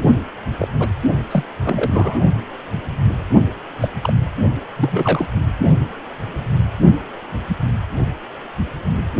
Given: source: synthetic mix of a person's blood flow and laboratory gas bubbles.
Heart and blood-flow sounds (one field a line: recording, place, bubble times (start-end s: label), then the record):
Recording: Doppler ultrasound of blood flow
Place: precordium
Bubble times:
0.00-0.04 s: bubbles
0.59-0.67 s: bubbles
0.80-0.88 s: bubbles
1.29-1.44 s: bubbles
1.62-2.19 s: bubbles
3.81-3.88 s: bubbles
4.01-4.13 s: bubbles
4.76-5.25 s: bubbles
From the record:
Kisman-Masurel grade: 232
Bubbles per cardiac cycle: several, 3 to 8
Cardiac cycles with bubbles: 50 to 99%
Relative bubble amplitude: moderate (0.250 to 0.450)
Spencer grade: 3 (all of the cardiac periods contain showers or single bubble signals, but not dominating or overriding the cardiac motion signals)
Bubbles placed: only in the low amplitude regions of the cardiac cycle